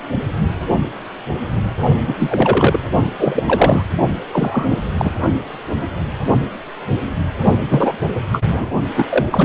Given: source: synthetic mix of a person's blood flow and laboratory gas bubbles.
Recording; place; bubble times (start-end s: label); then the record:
Doppler ultrasound of blood flow; precordium
2.07-2.13 s: bubbles
2.19-2.79 s: bubbles
3.19-3.43 s: bubbles
3.46-3.83 s: bubbles
4.32-4.77 s: bubbles
4.98-5.14 s: bubbles
7.69-7.93 s: bubbles
8.31-8.41 s: bubbles
8.48-8.68 s: bubbles
8.96-9.04 s: bubbles
9.09-9.26 s: bubbles
9.30-9.44 s: bubbles
From the record:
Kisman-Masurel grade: 233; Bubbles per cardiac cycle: several, 3 to 8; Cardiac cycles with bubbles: 50 to 99%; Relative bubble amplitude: loud (0.450 to 0.775); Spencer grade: 3 (all of the cardiac periods contain showers or single bubble signals, but not dominating or overriding the cardiac motion signals); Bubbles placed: only in the low amplitude regions of the cardiac cycle